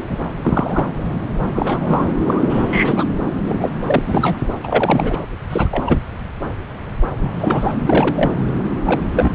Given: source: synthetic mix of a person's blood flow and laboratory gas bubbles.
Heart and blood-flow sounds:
Doppler ultrasound of blood flow; subclavian vein
0.00-0.24 s: bubbles
0.44-0.86 s: bubbles
1.54-2.04 s: bubbles
2.27-2.42 s: bubbles
2.49-3.04 s: bubbles
3.44-3.70 s: bubbles
3.86-4.00 s: bubbles
4.06-4.38 s: bubbles
4.63-5.18 s: bubbles
5.49-5.99 s: bubbles
7.17-7.75 s: bubbles
7.86-8.32 s: bubbles
8.86-9.01 s: bubbles
9.15-9.35 s: bubbles
From the record:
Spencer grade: 3 (all of the cardiac periods contain showers or single bubble signals, but not dominating or overriding the cardiac motion signals); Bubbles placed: anywhere in the cardiac cycle

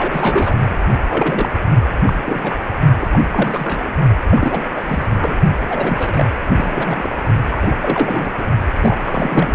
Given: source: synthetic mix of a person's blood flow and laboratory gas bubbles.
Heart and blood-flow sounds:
Doppler ultrasound of blood flow; precordium
0.00-0.55 s: bubbles
0.59-0.78 s: bubbles
1.08-1.55 s: bubbles
2.05-2.13 s: bubbles
2.24-2.56 s: bubbles
3.00-3.07 s: bubbles
3.13-3.22 s: bubbles
3.31-3.94 s: bubbles
4.29-4.65 s: bubbles
4.75-5.06 s: bubbles
5.19-5.37 s: bubbles
5.69-6.25 s: bubbles
6.55-7.09 s: bubbles
7.51-7.57 s: bubbles
7.59-7.77 s: bubbles
7.82-8.45 s: bubbles
8.80-8.97 s: bubbles
9.04-9.54 s: bubbles
From the record:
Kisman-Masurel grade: 342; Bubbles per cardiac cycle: rolling drumbeat, 9 or more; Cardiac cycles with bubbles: 100%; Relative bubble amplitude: moderate (0.250 to 0.450); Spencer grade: 3 (all of the cardiac periods contain showers or single bubble signals, but not dominating or overriding the cardiac motion signals); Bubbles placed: only in the low amplitude regions of the cardiac cycle

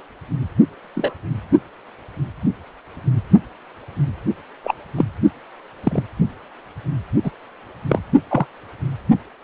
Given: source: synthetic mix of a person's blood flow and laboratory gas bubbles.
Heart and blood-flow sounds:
Doppler ultrasound of blood flow; precordium
0.96-1.14 s: bubbles
4.63-4.75 s: bubbles
4.96-5.04 s: bubbles
5.83-6.04 s: bubbles
7.24-7.31 s: bubbles
7.88-7.99 s: bubbles
8.29-8.46 s: bubbles
From the record:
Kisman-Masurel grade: 123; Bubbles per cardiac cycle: 1 to 2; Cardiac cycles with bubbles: 10 to 50%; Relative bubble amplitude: loud (0.450 to 0.775); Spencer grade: 2 (many but less than half of the cardiac periods contain bubble signals, singularly or in groups); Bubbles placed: only in the low amplitude regions of the cardiac cycle

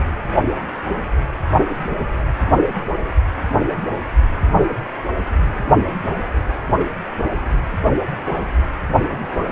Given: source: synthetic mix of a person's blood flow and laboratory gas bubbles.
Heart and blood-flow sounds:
Doppler ultrasound of blood flow; precordium
no bubbles
From the record:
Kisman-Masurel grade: 000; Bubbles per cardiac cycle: 0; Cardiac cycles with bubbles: 0%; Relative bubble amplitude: no bubbles discernible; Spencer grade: 0 (complete lack of bubble signals)

